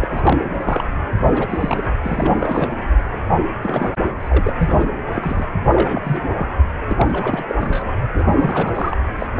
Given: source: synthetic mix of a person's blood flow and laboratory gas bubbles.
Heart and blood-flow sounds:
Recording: Doppler ultrasound of blood flow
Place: precordium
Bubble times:
0.02-0.08 s: bubbles
0.11-0.50 s: bubbles
0.61-0.84 s: bubbles
1.20-1.94 s: bubbles
2.03-2.80 s: bubbles
3.29-3.37 s: bubbles
3.63-3.94 s: bubbles
4.17-4.49 s: bubbles
4.58-4.88 s: bubbles
5.14-5.46 s: bubbles
5.65-6.27 s: bubbles
6.36-6.48 s: bubbles
6.89-7.45 s: bubbles
7.48-7.55 s: bubbles
7.60-7.93 s: bubbles
8.02-8.06 s: bubbles
8.14-8.97 s: bubbles
9.19-9.27 s: bubbles
From the record:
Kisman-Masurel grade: 342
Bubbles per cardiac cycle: rolling drumbeat, 9 or more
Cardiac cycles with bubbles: 100%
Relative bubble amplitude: moderate (0.250 to 0.450)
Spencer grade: 3 (all of the cardiac periods contain showers or single bubble signals, but not dominating or overriding the cardiac motion signals)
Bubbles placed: anywhere in the cardiac cycle

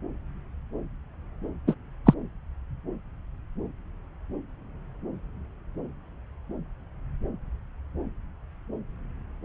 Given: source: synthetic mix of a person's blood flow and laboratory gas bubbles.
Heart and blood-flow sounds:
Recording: Doppler ultrasound of blood flow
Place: subclavian vein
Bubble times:
1.67-1.74 s: bubbles
2.06-2.14 s: bubbles
From the record:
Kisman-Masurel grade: 113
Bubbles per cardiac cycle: 1 to 2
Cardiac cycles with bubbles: 1 to 10%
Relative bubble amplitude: loud (0.450 to 0.775)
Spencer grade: 1 (occasional bubble signal discernible with the cardiac motion signal, with majority of cardiac periods free of bubbles)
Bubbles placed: anywhere in the cardiac cycle

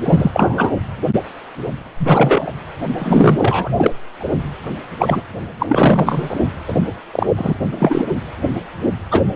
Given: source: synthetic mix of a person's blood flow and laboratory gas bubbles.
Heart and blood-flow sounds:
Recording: Doppler ultrasound of blood flow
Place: precordium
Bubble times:
0.03-0.71 s: bubbles
1.99-2.51 s: bubbles
2.97-3.69 s: bubbles
3.76-3.90 s: bubbles
4.19-4.29 s: bubbles
4.66-4.69 s: bubbles
4.98-5.21 s: bubbles
5.59-6.35 s: bubbles
6.67-6.73 s: bubbles
7.12-7.26 s: bubbles
7.36-7.55 s: bubbles
7.77-8.12 s: bubbles
9.11-9.26 s: bubbles
From the record:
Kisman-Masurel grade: 233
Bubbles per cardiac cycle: several, 3 to 8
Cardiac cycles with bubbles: 50 to 99%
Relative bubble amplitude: loud (0.450 to 0.775)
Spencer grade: 3 (all of the cardiac periods contain showers or single bubble signals, but not dominating or overriding the cardiac motion signals)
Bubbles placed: anywhere in the cardiac cycle

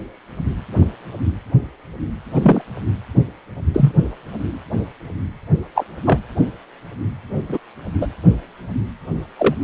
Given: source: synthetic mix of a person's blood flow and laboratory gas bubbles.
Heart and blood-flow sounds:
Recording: Doppler ultrasound of blood flow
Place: precordium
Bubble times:
2.33-2.62 s: bubbles
3.73-3.93 s: bubbles
5.74-5.84 s: bubbles
6.04-6.18 s: bubbles
7.48-7.58 s: bubbles
8.01-8.07 s: bubbles
9.38-9.54 s: bubbles
From the record:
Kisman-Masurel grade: 123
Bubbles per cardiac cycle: 1 to 2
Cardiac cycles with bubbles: 10 to 50%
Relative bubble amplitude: loud (0.450 to 0.775)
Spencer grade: 2 (many but less than half of the cardiac periods contain bubble signals, singularly or in groups)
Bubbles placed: only in the low amplitude regions of the cardiac cycle

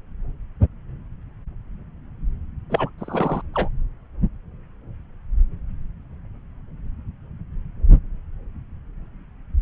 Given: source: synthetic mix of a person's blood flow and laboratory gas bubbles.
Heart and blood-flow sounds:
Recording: Doppler ultrasound of blood flow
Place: subclavian vein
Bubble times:
2.69-2.90 s: bubbles
2.98-3.42 s: bubbles
3.54-3.69 s: bubbles
From the record:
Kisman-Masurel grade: 212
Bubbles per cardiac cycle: several, 3 to 8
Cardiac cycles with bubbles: 1 to 10%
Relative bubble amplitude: moderate (0.250 to 0.450)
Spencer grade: 1 (occasional bubble signal discernible with the cardiac motion signal, with majority of cardiac periods free of bubbles)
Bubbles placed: anywhere in the cardiac cycle

